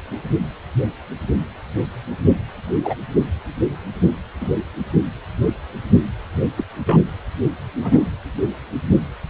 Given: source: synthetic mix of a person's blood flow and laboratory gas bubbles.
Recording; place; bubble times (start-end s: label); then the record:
Doppler ultrasound of blood flow; precordium
2.84-2.94 s: bubbles
4.02-4.15 s: bubbles
4.41-4.49 s: bubbles
6.57-6.63 s: bubbles
6.87-6.98 s: bubbles
7.82-8.09 s: bubbles
From the record:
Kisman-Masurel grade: 122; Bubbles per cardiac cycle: 1 to 2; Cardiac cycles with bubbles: 10 to 50%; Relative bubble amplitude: moderate (0.250 to 0.450); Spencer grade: 2 (many but less than half of the cardiac periods contain bubble signals, singularly or in groups); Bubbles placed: anywhere in the cardiac cycle